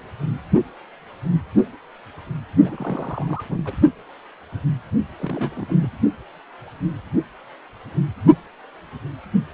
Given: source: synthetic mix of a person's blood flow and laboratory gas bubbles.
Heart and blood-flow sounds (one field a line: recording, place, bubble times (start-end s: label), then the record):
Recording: Doppler ultrasound of blood flow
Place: precordium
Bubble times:
2.64-3.44 s: bubbles
3.49-3.74 s: bubbles
5.17-5.87 s: bubbles
From the record:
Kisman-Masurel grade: 221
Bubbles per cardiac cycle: several, 3 to 8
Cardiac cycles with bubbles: 10 to 50%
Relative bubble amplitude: barely perceptible (0.100 to 0.250)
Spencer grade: 2 (many but less than half of the cardiac periods contain bubble signals, singularly or in groups)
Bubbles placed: only in the low amplitude regions of the cardiac cycle